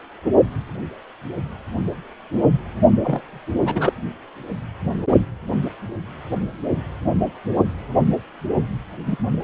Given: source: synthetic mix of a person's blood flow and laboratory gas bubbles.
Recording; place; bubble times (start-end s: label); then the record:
Doppler ultrasound of blood flow; precordium
3.03-3.39 s: bubbles
3.66-3.93 s: bubbles
9.05-9.17 s: bubbles
From the record:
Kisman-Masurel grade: 222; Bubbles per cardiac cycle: several, 3 to 8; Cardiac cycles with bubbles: 10 to 50%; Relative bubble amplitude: moderate (0.250 to 0.450); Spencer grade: 2 (many but less than half of the cardiac periods contain bubble signals, singularly or in groups); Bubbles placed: only in the low amplitude regions of the cardiac cycle